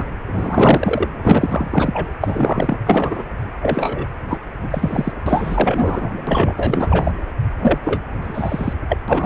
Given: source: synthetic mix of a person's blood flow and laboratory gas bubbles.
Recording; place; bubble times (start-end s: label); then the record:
Doppler ultrasound of blood flow; precordium
0.00-0.07 s: bubbles
0.27-1.08 s: bubbles
1.22-2.08 s: bubbles
2.20-2.78 s: bubbles
2.85-3.23 s: bubbles
3.62-4.04 s: bubbles
4.29-4.39 s: bubbles
4.62-5.13 s: bubbles
5.26-6.13 s: bubbles
6.27-6.54 s: bubbles
6.56-7.12 s: bubbles
7.61-7.79 s: bubbles
7.83-8.03 s: bubbles
8.21-8.74 s: bubbles
8.89-8.98 s: bubbles
9.08-9.26 s: bubbles
From the record:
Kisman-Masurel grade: 444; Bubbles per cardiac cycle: continuous sound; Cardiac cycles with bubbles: 100%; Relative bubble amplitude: maximal (0.775 to 0.999); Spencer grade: 4 (maximum detectable bubble signal sounding continuously throughout systole and diastole of every cardiac period, and overriding the amplitude of the normal cardiac signals); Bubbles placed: anywhere in the cardiac cycle